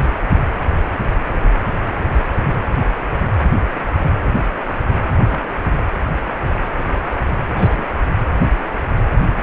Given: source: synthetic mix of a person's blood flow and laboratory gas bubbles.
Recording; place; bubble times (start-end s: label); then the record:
Doppler ultrasound of blood flow; precordium
5.29-5.40 s: bubbles
5.75-5.82 s: bubbles
7.56-7.87 s: bubbles
8.36-8.49 s: bubbles
8.54-8.64 s: bubbles
9.37-9.42 s: bubbles
From the record:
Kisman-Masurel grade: 121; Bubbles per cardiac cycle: 1 to 2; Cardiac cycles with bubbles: 10 to 50%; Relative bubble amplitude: barely perceptible (0.100 to 0.250); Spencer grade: 2 (many but less than half of the cardiac periods contain bubble signals, singularly or in groups); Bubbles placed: anywhere in the cardiac cycle